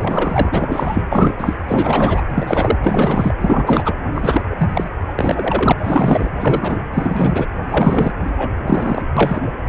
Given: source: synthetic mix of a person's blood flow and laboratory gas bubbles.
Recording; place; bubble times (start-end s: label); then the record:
Doppler ultrasound of blood flow; precordium
0.00-1.03 s: bubbles
1.11-1.34 s: bubbles
1.38-1.54 s: bubbles
1.68-2.23 s: bubbles
2.27-2.78 s: bubbles
2.82-3.34 s: bubbles
3.40-3.94 s: bubbles
4.15-4.42 s: bubbles
4.50-4.90 s: bubbles
5.08-5.14 s: bubbles
5.16-5.73 s: bubbles
5.77-6.29 s: bubbles
6.40-6.83 s: bubbles
6.94-7.46 s: bubbles
7.69-8.12 s: bubbles
8.38-8.50 s: bubbles
8.66-9.02 s: bubbles
9.17-9.42 s: bubbles
From the record:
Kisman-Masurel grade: 343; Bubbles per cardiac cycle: rolling drumbeat, 9 or more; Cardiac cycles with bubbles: 100%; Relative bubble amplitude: loud (0.450 to 0.775); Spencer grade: 3 (all of the cardiac periods contain showers or single bubble signals, but not dominating or overriding the cardiac motion signals); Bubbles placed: anywhere in the cardiac cycle